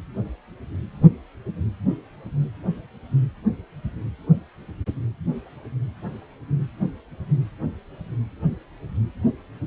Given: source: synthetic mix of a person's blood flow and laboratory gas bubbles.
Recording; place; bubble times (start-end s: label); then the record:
Doppler ultrasound of blood flow; precordium
no bubbles
From the record:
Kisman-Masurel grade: 000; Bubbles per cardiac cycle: 0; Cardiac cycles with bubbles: 0%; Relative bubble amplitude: no bubbles discernible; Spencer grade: 0 (complete lack of bubble signals)